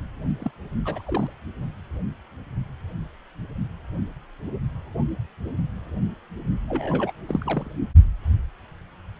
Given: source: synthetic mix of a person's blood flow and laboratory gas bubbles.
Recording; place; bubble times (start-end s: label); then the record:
Doppler ultrasound of blood flow; precordium
0.40-0.50 s: bubbles
0.85-1.02 s: bubbles
1.06-1.30 s: bubbles
6.68-7.12 s: bubbles
7.27-7.69 s: bubbles
From the record:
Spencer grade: 2 (many but less than half of the cardiac periods contain bubble signals, singularly or in groups); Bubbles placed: only in the low amplitude regions of the cardiac cycle